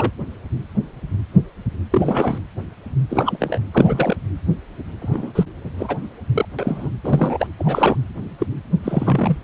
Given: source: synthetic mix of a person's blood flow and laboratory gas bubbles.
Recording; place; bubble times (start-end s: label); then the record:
Doppler ultrasound of blood flow; precordium
0.00-0.11 s: bubbles
1.91-2.42 s: bubbles
3.08-3.58 s: bubbles
3.73-4.17 s: bubbles
5.01-5.32 s: bubbles
5.35-5.46 s: bubbles
5.78-5.97 s: bubbles
6.32-6.46 s: bubbles
6.58-6.91 s: bubbles
7.04-7.47 s: bubbles
7.58-7.96 s: bubbles
8.38-8.46 s: bubbles
8.84-9.37 s: bubbles
From the record:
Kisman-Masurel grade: 233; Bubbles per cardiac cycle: several, 3 to 8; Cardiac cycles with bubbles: 50 to 99%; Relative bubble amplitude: loud (0.450 to 0.775); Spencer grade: 3 (all of the cardiac periods contain showers or single bubble signals, but not dominating or overriding the cardiac motion signals); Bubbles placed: anywhere in the cardiac cycle